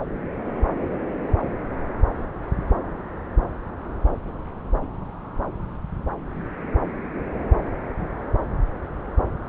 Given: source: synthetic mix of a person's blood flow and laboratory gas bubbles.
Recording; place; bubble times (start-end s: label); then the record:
Doppler ultrasound of blood flow; subclavian vein
no bubbles
From the record:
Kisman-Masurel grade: 000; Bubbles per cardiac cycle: 0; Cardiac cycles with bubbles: 0%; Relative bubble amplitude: no bubbles discernible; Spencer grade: 0 (complete lack of bubble signals)